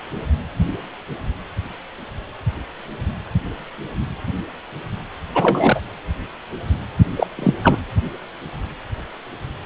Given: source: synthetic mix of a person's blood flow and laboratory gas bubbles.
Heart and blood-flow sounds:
Doppler ultrasound of blood flow; precordium
5.34-5.80 s: bubbles
7.16-7.26 s: bubbles
7.36-7.53 s: bubbles
7.63-7.78 s: bubbles
From the record:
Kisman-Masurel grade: 223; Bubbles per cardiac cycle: several, 3 to 8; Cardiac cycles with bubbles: 10 to 50%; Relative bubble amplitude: loud (0.450 to 0.775); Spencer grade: 2 (many but less than half of the cardiac periods contain bubble signals, singularly or in groups); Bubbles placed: anywhere in the cardiac cycle

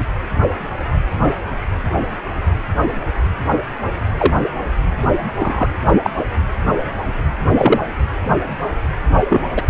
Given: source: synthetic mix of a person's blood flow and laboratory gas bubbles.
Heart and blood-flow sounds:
Doppler ultrasound of blood flow; precordium
4.17-4.34 s: bubbles
5.38-5.67 s: bubbles
5.87-5.95 s: bubbles
6.03-6.10 s: bubbles
7.57-7.79 s: bubbles
9.29-9.44 s: bubbles
9.57-9.62 s: bubbles
From the record:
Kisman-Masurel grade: 123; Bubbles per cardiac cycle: 1 to 2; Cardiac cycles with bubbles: 10 to 50%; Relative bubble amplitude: loud (0.450 to 0.775); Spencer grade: 2 (many but less than half of the cardiac periods contain bubble signals, singularly or in groups); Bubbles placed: anywhere in the cardiac cycle

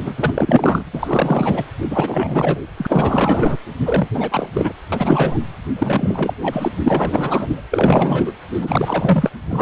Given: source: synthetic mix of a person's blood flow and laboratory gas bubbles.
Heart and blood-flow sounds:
Doppler ultrasound of blood flow; precordium
0.00-0.14 s: bubbles
0.16-0.84 s: bubbles
0.92-1.65 s: bubbles
1.90-2.60 s: bubbles
2.77-3.57 s: bubbles
3.84-4.08 s: bubbles
4.13-4.49 s: bubbles
4.54-4.72 s: bubbles
4.92-5.38 s: bubbles
5.75-6.33 s: bubbles
6.42-6.71 s: bubbles
6.83-7.65 s: bubbles
7.71-8.32 s: bubbles
8.54-9.31 s: bubbles
9.49-9.62 s: bubbles
From the record:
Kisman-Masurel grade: 444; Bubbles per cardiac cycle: continuous sound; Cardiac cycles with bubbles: 100%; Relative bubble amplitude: maximal (0.775 to 0.999); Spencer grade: 4 (maximum detectable bubble signal sounding continuously throughout systole and diastole of every cardiac period, and overriding the amplitude of the normal cardiac signals); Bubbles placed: anywhere in the cardiac cycle

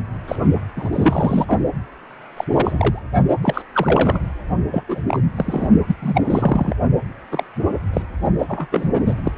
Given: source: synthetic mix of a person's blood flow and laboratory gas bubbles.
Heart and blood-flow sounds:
Doppler ultrasound of blood flow; precordium
0.28-0.35 s: bubbles
0.77-0.89 s: bubbles
0.93-1.59 s: bubbles
2.37-2.45 s: bubbles
2.51-3.03 s: bubbles
3.42-3.62 s: bubbles
3.74-4.19 s: bubbles
4.71-4.83 s: bubbles
4.89-5.03 s: bubbles
5.07-5.20 s: bubbles
5.37-5.69 s: bubbles
5.88-5.95 s: bubbles
6.02-6.75 s: bubbles
7.32-7.44 s: bubbles
7.93-8.02 s: bubbles
8.38-8.46 s: bubbles
8.48-8.67 s: bubbles
8.71-8.90 s: bubbles
8.93-9.01 s: bubbles
9.06-9.14 s: bubbles
9.24-9.32 s: bubbles
From the record:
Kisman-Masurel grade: 242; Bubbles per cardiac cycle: several, 3 to 8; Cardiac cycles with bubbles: 100%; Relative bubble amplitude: moderate (0.250 to 0.450); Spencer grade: 3 (all of the cardiac periods contain showers or single bubble signals, but not dominating or overriding the cardiac motion signals); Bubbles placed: only in the low amplitude regions of the cardiac cycle

